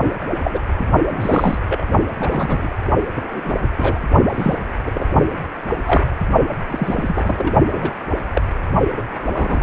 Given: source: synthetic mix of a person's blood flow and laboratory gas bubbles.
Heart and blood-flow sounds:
Doppler ultrasound of blood flow; precordium
0.44-0.60 s: bubbles
0.78-0.84 s: bubbles
1.09-1.58 s: bubbles
1.66-1.85 s: bubbles
2.19-2.68 s: bubbles
3.16-3.54 s: bubbles
3.77-4.00 s: bubbles
4.32-4.55 s: bubbles
4.86-4.92 s: bubbles
4.94-5.06 s: bubbles
5.86-6.03 s: bubbles
6.68-7.54 s: bubbles
7.72-7.92 s: bubbles
8.34-8.41 s: bubbles
8.97-9.07 s: bubbles
9.24-9.63 s: bubbles
From the record:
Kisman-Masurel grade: 242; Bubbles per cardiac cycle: several, 3 to 8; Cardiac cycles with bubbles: 100%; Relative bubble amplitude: moderate (0.250 to 0.450); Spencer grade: 3 (all of the cardiac periods contain showers or single bubble signals, but not dominating or overriding the cardiac motion signals); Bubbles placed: only in the low amplitude regions of the cardiac cycle

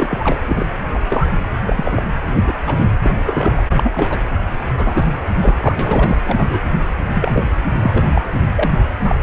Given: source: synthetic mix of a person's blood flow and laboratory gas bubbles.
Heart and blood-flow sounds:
Doppler ultrasound of blood flow; precordium
0.00-0.40 s: bubbles
0.46-0.67 s: bubbles
0.94-0.99 s: bubbles
1.04-1.27 s: bubbles
1.66-2.02 s: bubbles
2.21-2.86 s: bubbles
3.03-3.17 s: bubbles
3.26-3.65 s: bubbles
3.73-4.20 s: bubbles
4.77-5.06 s: bubbles
5.40-5.55 s: bubbles
5.61-5.75 s: bubbles
5.79-6.22 s: bubbles
6.27-6.60 s: bubbles
7.14-7.44 s: bubbles
7.75-8.25 s: bubbles
8.56-8.70 s: bubbles
9.01-9.15 s: bubbles
From the record:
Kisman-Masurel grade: 243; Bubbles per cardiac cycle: several, 3 to 8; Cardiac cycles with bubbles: 100%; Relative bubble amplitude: loud (0.450 to 0.775); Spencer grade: 3 (all of the cardiac periods contain showers or single bubble signals, but not dominating or overriding the cardiac motion signals); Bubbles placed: anywhere in the cardiac cycle

